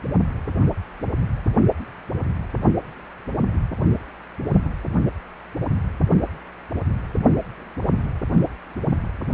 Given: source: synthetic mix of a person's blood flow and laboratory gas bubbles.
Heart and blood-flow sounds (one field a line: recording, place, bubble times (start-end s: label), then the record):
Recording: Doppler ultrasound of blood flow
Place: precordium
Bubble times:
4.50-4.69 s: bubbles
From the record:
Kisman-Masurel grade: 111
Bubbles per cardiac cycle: 1 to 2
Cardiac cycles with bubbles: 1 to 10%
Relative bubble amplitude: barely perceptible (0.100 to 0.250)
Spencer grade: 1 (occasional bubble signal discernible with the cardiac motion signal, with majority of cardiac periods free of bubbles)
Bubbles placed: only in the low amplitude regions of the cardiac cycle